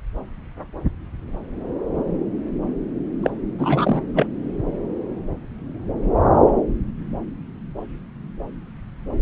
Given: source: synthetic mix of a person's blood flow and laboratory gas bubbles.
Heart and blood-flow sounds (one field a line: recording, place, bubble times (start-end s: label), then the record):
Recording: Doppler ultrasound of blood flow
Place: subclavian vein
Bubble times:
3.22-3.30 s: bubbles
3.58-4.02 s: bubbles
4.14-4.27 s: bubbles
From the record:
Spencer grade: 1 (occasional bubble signal discernible with the cardiac motion signal, with majority of cardiac periods free of bubbles)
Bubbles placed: anywhere in the cardiac cycle